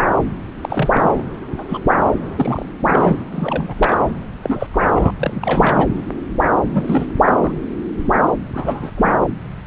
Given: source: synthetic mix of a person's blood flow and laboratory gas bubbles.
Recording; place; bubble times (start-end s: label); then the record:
Doppler ultrasound of blood flow; subclavian vein
0.61-1.23 s: bubbles
1.58-1.64 s: bubbles
1.69-1.79 s: bubbles
1.87-1.95 s: bubbles
2.35-2.65 s: bubbles
2.83-3.17 s: bubbles
3.30-3.74 s: bubbles
3.77-4.03 s: bubbles
4.42-4.67 s: bubbles
4.72-5.10 s: bubbles
5.17-5.89 s: bubbles
6.68-7.06 s: bubbles
7.25-7.32 s: bubbles
7.41-7.53 s: bubbles
8.54-8.91 s: bubbles
8.97-9.18 s: bubbles
From the record:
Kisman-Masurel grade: 232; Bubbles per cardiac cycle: several, 3 to 8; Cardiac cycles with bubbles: 50 to 99%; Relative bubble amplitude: moderate (0.250 to 0.450); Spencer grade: 3 (all of the cardiac periods contain showers or single bubble signals, but not dominating or overriding the cardiac motion signals); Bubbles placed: anywhere in the cardiac cycle